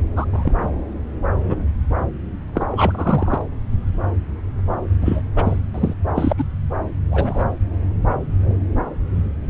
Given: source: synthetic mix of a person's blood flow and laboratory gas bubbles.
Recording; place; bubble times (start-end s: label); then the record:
Doppler ultrasound of blood flow; subclavian vein
0.16-0.26 s: bubbles
0.32-0.67 s: bubbles
1.47-1.60 s: bubbles
2.54-3.42 s: bubbles
5.01-5.22 s: bubbles
5.35-5.56 s: bubbles
5.74-5.94 s: bubbles
6.15-6.33 s: bubbles
6.38-6.45 s: bubbles
7.11-7.46 s: bubbles
From the record:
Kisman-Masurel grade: 232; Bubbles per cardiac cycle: several, 3 to 8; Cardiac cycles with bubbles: 50 to 99%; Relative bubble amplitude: moderate (0.250 to 0.450); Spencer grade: 3 (all of the cardiac periods contain showers or single bubble signals, but not dominating or overriding the cardiac motion signals); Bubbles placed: anywhere in the cardiac cycle